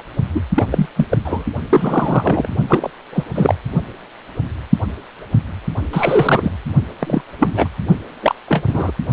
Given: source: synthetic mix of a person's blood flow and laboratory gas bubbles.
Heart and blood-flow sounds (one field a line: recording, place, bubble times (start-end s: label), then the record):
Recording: Doppler ultrasound of blood flow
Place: precordium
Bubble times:
0.00-0.02 s: bubbles
0.34-0.41 s: bubbles
0.55-0.66 s: bubbles
0.72-0.88 s: bubbles
0.96-1.06 s: bubbles
1.10-1.18 s: bubbles
1.25-1.44 s: bubbles
1.69-2.49 s: bubbles
2.69-2.90 s: bubbles
3.13-3.24 s: bubbles
3.35-3.55 s: bubbles
5.93-6.52 s: bubbles
6.99-7.22 s: bubbles
7.39-7.68 s: bubbles
8.22-8.35 s: bubbles
8.48-8.63 s: bubbles
8.66-8.91 s: bubbles
From the record:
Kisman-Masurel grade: 233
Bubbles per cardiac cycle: several, 3 to 8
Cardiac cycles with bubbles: 50 to 99%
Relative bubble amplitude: loud (0.450 to 0.775)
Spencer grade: 3 (all of the cardiac periods contain showers or single bubble signals, but not dominating or overriding the cardiac motion signals)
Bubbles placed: only in the low amplitude regions of the cardiac cycle